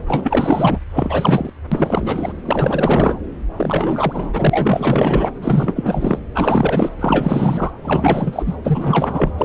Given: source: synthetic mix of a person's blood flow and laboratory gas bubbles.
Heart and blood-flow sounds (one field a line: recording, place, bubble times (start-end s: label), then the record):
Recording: Doppler ultrasound of blood flow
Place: subclavian vein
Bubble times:
0.08-0.80 s: bubbles
0.93-1.50 s: bubbles
1.72-2.33 s: bubbles
2.45-3.19 s: bubbles
3.56-5.29 s: bubbles
5.42-6.19 s: bubbles
6.34-6.91 s: bubbles
6.99-7.71 s: bubbles
7.83-8.57 s: bubbles
8.64-9.32 s: bubbles
9.37-9.45 s: bubbles
From the record:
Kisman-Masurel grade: 444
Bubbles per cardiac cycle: continuous sound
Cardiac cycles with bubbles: 100%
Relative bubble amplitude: maximal (0.775 to 0.999)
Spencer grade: 4 (maximum detectable bubble signal sounding continuously throughout systole and diastole of every cardiac period, and overriding the amplitude of the normal cardiac signals)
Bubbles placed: anywhere in the cardiac cycle